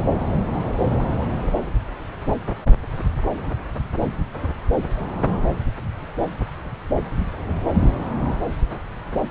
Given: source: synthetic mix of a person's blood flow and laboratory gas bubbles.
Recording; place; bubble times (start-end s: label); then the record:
Doppler ultrasound of blood flow; subclavian vein
no bubbles
From the record:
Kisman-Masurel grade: 000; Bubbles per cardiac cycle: 0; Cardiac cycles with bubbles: 0%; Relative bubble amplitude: no bubbles discernible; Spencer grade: 0 (complete lack of bubble signals)